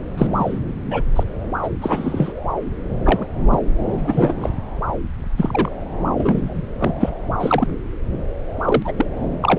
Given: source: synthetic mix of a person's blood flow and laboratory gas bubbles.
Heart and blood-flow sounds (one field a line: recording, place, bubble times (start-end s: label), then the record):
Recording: Doppler ultrasound of blood flow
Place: subclavian vein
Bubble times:
0.17-0.27 s: bubbles
0.33-0.58 s: bubbles
0.91-1.02 s: bubbles
1.16-1.24 s: bubbles
1.62-1.69 s: bubbles
1.81-2.33 s: bubbles
3.05-3.27 s: bubbles
3.51-3.59 s: bubbles
3.88-4.34 s: bubbles
4.40-4.50 s: bubbles
5.37-5.82 s: bubbles
6.16-6.62 s: bubbles
6.79-6.94 s: bubbles
7.00-7.10 s: bubbles
7.39-7.67 s: bubbles
8.64-8.92 s: bubbles
8.97-9.05 s: bubbles
9.42-9.59 s: bubbles
From the record:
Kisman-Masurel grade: 243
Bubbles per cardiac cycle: several, 3 to 8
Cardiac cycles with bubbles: 100%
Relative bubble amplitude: loud (0.450 to 0.775)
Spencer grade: 3 (all of the cardiac periods contain showers or single bubble signals, but not dominating or overriding the cardiac motion signals)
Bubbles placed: anywhere in the cardiac cycle